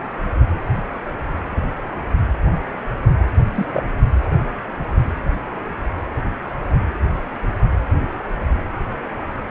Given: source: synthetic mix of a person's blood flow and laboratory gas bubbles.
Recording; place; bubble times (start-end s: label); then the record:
Doppler ultrasound of blood flow; precordium
3.54-3.66 s: bubbles
3.72-3.84 s: bubbles
From the record:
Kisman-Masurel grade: 112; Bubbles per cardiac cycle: 1 to 2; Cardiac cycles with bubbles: 1 to 10%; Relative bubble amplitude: moderate (0.250 to 0.450); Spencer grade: 1 (occasional bubble signal discernible with the cardiac motion signal, with majority of cardiac periods free of bubbles); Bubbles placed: anywhere in the cardiac cycle